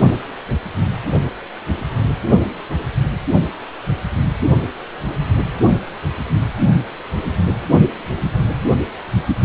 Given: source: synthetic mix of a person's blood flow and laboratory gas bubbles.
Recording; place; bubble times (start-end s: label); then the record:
Doppler ultrasound of blood flow; precordium
no bubbles
From the record:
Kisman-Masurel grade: 000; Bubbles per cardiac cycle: 0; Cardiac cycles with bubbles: 0%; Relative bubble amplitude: no bubbles discernible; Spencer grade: 0 (complete lack of bubble signals)